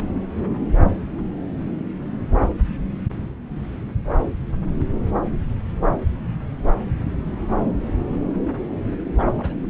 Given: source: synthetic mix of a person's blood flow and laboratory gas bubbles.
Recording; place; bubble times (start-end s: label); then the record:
Doppler ultrasound of blood flow; subclavian vein
0.00-0.10 s: bubbles
9.15-9.28 s: bubbles
9.34-9.67 s: bubbles
From the record:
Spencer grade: 2 (many but less than half of the cardiac periods contain bubble signals, singularly or in groups); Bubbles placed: anywhere in the cardiac cycle